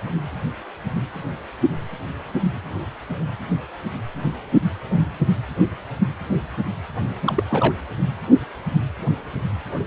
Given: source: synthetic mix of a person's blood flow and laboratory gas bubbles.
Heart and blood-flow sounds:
Doppler ultrasound of blood flow; precordium
7.25-7.44 s: bubbles
7.50-7.74 s: bubbles
From the record:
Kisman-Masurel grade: 212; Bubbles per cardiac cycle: several, 3 to 8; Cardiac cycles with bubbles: 1 to 10%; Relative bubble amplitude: moderate (0.250 to 0.450); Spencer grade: 1 (occasional bubble signal discernible with the cardiac motion signal, with majority of cardiac periods free of bubbles); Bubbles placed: anywhere in the cardiac cycle

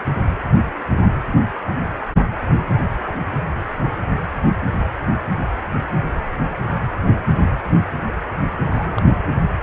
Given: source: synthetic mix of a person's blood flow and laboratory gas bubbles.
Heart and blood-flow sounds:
Doppler ultrasound of blood flow; precordium
8.66-9.17 s: bubbles
From the record:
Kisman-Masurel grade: 211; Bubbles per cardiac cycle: several, 3 to 8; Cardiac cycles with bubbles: 1 to 10%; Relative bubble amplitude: barely perceptible (0.100 to 0.250); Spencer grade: 1 (occasional bubble signal discernible with the cardiac motion signal, with majority of cardiac periods free of bubbles); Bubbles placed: anywhere in the cardiac cycle

